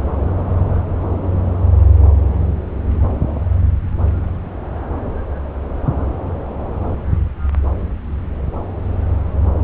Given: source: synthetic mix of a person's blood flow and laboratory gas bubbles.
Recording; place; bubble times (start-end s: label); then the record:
Doppler ultrasound of blood flow; subclavian vein
no bubbles
From the record:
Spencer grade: 0 (complete lack of bubble signals)